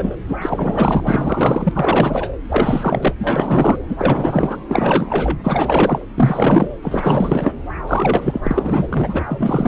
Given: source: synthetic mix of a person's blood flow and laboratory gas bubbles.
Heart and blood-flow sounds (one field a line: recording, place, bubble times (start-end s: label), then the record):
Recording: Doppler ultrasound of blood flow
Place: subclavian vein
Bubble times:
0.00-0.15 s: bubbles
0.28-1.72 s: bubbles
1.74-2.29 s: bubbles
2.48-3.14 s: bubbles
3.20-3.81 s: bubbles
3.89-4.57 s: bubbles
4.68-5.38 s: bubbles
5.43-6.05 s: bubbles
6.17-6.68 s: bubbles
6.82-7.52 s: bubbles
7.87-8.88 s: bubbles
8.90-9.23 s: bubbles
9.27-9.68 s: bubbles
From the record:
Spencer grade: 4 (maximum detectable bubble signal sounding continuously throughout systole and diastole of every cardiac period, and overriding the amplitude of the normal cardiac signals)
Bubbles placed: anywhere in the cardiac cycle